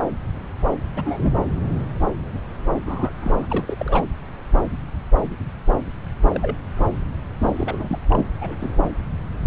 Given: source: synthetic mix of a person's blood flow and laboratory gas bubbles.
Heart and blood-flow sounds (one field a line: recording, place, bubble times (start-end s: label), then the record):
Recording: Doppler ultrasound of blood flow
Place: subclavian vein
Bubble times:
0.96-1.31 s: bubbles
2.74-2.79 s: bubbles
2.85-3.12 s: bubbles
3.21-3.46 s: bubbles
3.50-4.04 s: bubbles
6.32-6.56 s: bubbles
6.76-6.89 s: bubbles
7.38-7.99 s: bubbles
8.08-8.26 s: bubbles
8.41-8.55 s: bubbles
8.60-8.84 s: bubbles
From the record:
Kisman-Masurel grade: 221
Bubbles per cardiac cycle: several, 3 to 8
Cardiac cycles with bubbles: 10 to 50%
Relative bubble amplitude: barely perceptible (0.100 to 0.250)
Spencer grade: 2 (many but less than half of the cardiac periods contain bubble signals, singularly or in groups)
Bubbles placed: anywhere in the cardiac cycle